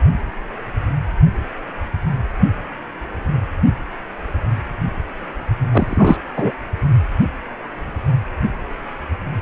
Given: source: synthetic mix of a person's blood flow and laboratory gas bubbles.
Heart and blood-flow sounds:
Doppler ultrasound of blood flow; precordium
5.71-6.17 s: bubbles
6.36-6.51 s: bubbles
From the record:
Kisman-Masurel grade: 213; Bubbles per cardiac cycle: several, 3 to 8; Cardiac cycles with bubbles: 1 to 10%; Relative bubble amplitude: loud (0.450 to 0.775); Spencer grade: 1 (occasional bubble signal discernible with the cardiac motion signal, with majority of cardiac periods free of bubbles); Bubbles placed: only in the low amplitude regions of the cardiac cycle

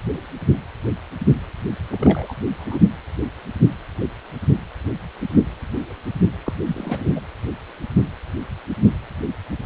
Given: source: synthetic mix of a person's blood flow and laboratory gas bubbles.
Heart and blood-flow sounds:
Doppler ultrasound of blood flow; precordium
1.90-2.33 s: bubbles
2.57-2.83 s: bubbles
6.45-6.53 s: bubbles
6.67-7.11 s: bubbles
7.16-7.20 s: bubbles
From the record:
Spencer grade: 2 (many but less than half of the cardiac periods contain bubble signals, singularly or in groups); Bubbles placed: anywhere in the cardiac cycle

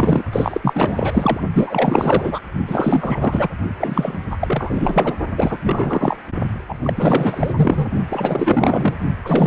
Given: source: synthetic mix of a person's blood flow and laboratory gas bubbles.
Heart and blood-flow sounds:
Doppler ultrasound of blood flow; precordium
0.00-0.22 s: bubbles
0.33-1.40 s: bubbles
1.53-2.40 s: bubbles
2.67-3.49 s: bubbles
3.79-4.22 s: bubbles
4.31-4.37 s: bubbles
4.40-5.15 s: bubbles
5.37-5.59 s: bubbles
5.62-6.17 s: bubbles
6.69-7.53 s: bubbles
7.56-7.88 s: bubbles
8.09-8.97 s: bubbles
9.25-9.47 s: bubbles
From the record:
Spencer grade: 4 (maximum detectable bubble signal sounding continuously throughout systole and diastole of every cardiac period, and overriding the amplitude of the normal cardiac signals); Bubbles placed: only in the low amplitude regions of the cardiac cycle

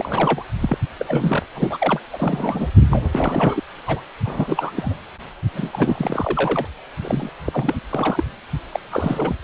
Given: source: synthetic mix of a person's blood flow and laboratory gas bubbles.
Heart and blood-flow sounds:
Doppler ultrasound of blood flow; precordium
0.00-0.45 s: bubbles
0.60-0.77 s: bubbles
0.99-1.05 s: bubbles
1.08-1.46 s: bubbles
1.55-1.77 s: bubbles
1.80-2.00 s: bubbles
2.12-2.67 s: bubbles
2.90-3.01 s: bubbles
3.15-3.63 s: bubbles
3.86-4.01 s: bubbles
4.24-4.95 s: bubbles
5.54-6.66 s: bubbles
7.02-7.29 s: bubbles
7.46-7.75 s: bubbles
7.89-8.24 s: bubbles
8.72-8.79 s: bubbles
8.91-9.36 s: bubbles
From the record:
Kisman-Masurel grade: 342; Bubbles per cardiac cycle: rolling drumbeat, 9 or more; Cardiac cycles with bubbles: 100%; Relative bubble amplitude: moderate (0.250 to 0.450); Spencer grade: 3 (all of the cardiac periods contain showers or single bubble signals, but not dominating or overriding the cardiac motion signals); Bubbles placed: anywhere in the cardiac cycle

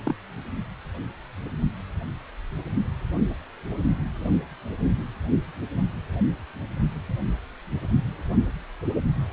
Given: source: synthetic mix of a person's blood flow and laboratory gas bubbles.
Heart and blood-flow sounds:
Doppler ultrasound of blood flow; precordium
0.06-0.14 s: bubbles
From the record:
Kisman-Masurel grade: 111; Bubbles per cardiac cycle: 1 to 2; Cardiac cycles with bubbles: 1 to 10%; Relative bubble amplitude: barely perceptible (0.100 to 0.250); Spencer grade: 1 (occasional bubble signal discernible with the cardiac motion signal, with majority of cardiac periods free of bubbles); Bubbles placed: only in the low amplitude regions of the cardiac cycle

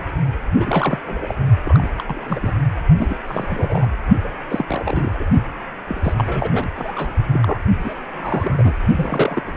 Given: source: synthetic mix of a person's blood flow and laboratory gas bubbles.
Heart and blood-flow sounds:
Doppler ultrasound of blood flow; precordium
0.00-0.05 s: bubbles
0.54-0.99 s: bubbles
1.05-1.34 s: bubbles
1.66-1.89 s: bubbles
1.98-2.04 s: bubbles
2.06-2.53 s: bubbles
2.98-3.19 s: bubbles
3.27-3.88 s: bubbles
4.24-4.29 s: bubbles
4.50-4.65 s: bubbles
4.69-5.25 s: bubbles
5.88-6.13 s: bubbles
6.17-6.68 s: bubbles
6.75-7.11 s: bubbles
7.33-7.62 s: bubbles
7.83-7.94 s: bubbles
8.14-8.73 s: bubbles
8.95-9.43 s: bubbles
9.46-9.57 s: bubbles
From the record:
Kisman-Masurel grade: 342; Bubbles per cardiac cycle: rolling drumbeat, 9 or more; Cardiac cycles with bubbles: 100%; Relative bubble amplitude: moderate (0.250 to 0.450); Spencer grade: 3 (all of the cardiac periods contain showers or single bubble signals, but not dominating or overriding the cardiac motion signals); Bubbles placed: only in the low amplitude regions of the cardiac cycle

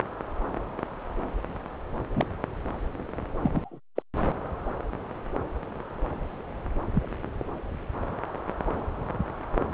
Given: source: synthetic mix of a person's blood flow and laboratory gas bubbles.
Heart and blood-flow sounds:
Doppler ultrasound of blood flow; subclavian vein
2.15-2.26 s: bubbles
3.42-3.79 s: bubbles
3.96-4.02 s: bubbles
6.94-7.07 s: bubbles
From the record:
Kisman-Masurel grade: 122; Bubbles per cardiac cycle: 1 to 2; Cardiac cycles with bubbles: 10 to 50%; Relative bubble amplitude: moderate (0.250 to 0.450); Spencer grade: 2 (many but less than half of the cardiac periods contain bubble signals, singularly or in groups); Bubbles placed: anywhere in the cardiac cycle

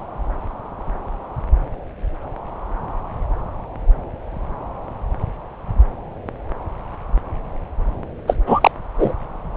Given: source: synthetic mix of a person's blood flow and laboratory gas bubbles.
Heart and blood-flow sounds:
Doppler ultrasound of blood flow; subclavian vein
8.27-8.35 s: bubbles
8.46-8.71 s: bubbles
8.98-9.13 s: bubbles
From the record:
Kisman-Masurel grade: 213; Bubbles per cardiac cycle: several, 3 to 8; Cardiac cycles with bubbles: 1 to 10%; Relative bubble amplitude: loud (0.450 to 0.775); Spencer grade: 1 (occasional bubble signal discernible with the cardiac motion signal, with majority of cardiac periods free of bubbles); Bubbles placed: anywhere in the cardiac cycle

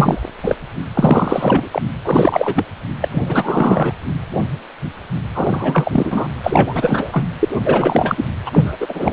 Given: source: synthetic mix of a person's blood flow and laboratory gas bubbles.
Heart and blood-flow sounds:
Doppler ultrasound of blood flow; precordium
0.00-0.21 s: bubbles
0.43-0.55 s: bubbles
0.94-1.69 s: bubbles
1.72-1.82 s: bubbles
2.04-2.64 s: bubbles
3.01-3.08 s: bubbles
3.11-3.93 s: bubbles
5.35-6.28 s: bubbles
6.43-7.25 s: bubbles
7.40-7.49 s: bubbles
7.65-8.25 s: bubbles
8.46-8.77 s: bubbles
8.80-9.13 s: bubbles
From the record:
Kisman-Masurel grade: 333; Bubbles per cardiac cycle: rolling drumbeat, 9 or more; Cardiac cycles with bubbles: 50 to 99%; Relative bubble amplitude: loud (0.450 to 0.775); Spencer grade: 3 (all of the cardiac periods contain showers or single bubble signals, but not dominating or overriding the cardiac motion signals); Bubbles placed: anywhere in the cardiac cycle

